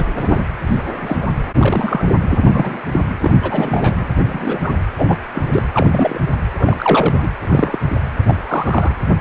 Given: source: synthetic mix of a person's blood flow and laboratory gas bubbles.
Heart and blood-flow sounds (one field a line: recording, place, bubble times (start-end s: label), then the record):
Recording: Doppler ultrasound of blood flow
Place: precordium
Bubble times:
0.00-0.10 s: bubbles
0.17-0.41 s: bubbles
0.67-0.82 s: bubbles
1.01-1.17 s: bubbles
1.22-1.28 s: bubbles
1.58-2.05 s: bubbles
2.30-2.80 s: bubbles
2.92-3.00 s: bubbles
3.21-3.38 s: bubbles
3.42-4.05 s: bubbles
4.17-4.59 s: bubbles
4.62-4.74 s: bubbles
4.97-5.17 s: bubbles
5.34-5.42 s: bubbles
5.51-5.62 s: bubbles
5.73-6.19 s: bubbles
6.58-7.18 s: bubbles
7.22-7.28 s: bubbles
7.39-7.79 s: bubbles
8.27-8.35 s: bubbles
8.41-8.96 s: bubbles
From the record:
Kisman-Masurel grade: 242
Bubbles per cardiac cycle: several, 3 to 8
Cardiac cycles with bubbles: 100%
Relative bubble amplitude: moderate (0.250 to 0.450)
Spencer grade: 3 (all of the cardiac periods contain showers or single bubble signals, but not dominating or overriding the cardiac motion signals)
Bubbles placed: anywhere in the cardiac cycle